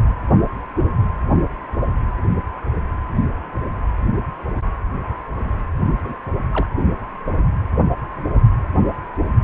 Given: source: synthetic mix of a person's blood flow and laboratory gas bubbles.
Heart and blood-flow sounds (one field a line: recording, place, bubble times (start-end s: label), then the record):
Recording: Doppler ultrasound of blood flow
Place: precordium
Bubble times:
6.02-6.13 s: bubbles
6.52-6.67 s: bubbles
From the record:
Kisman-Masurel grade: 112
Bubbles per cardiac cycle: 1 to 2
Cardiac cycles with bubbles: 1 to 10%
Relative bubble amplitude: moderate (0.250 to 0.450)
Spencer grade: 1 (occasional bubble signal discernible with the cardiac motion signal, with majority of cardiac periods free of bubbles)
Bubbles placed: anywhere in the cardiac cycle